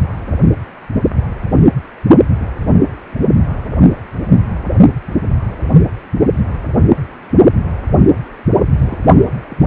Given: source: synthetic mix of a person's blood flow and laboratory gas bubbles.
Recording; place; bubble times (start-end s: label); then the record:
Doppler ultrasound of blood flow; precordium
8.74-8.98 s: bubbles
9.50-9.62 s: bubbles
9.64-9.67 s: bubbles
From the record:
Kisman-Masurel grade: 211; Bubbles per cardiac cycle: several, 3 to 8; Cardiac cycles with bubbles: 1 to 10%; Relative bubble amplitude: barely perceptible (0.100 to 0.250); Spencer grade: 1 (occasional bubble signal discernible with the cardiac motion signal, with majority of cardiac periods free of bubbles); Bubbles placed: only in the low amplitude regions of the cardiac cycle